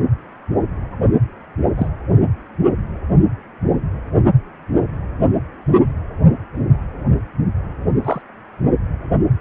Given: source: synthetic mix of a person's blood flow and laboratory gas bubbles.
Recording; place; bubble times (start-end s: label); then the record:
Doppler ultrasound of blood flow; precordium
1.77-1.88 s: bubbles
8.04-8.21 s: bubbles
From the record:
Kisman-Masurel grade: 112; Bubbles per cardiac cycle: 1 to 2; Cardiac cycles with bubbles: 1 to 10%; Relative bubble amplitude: moderate (0.250 to 0.450); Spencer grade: 1 (occasional bubble signal discernible with the cardiac motion signal, with majority of cardiac periods free of bubbles); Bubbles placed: anywhere in the cardiac cycle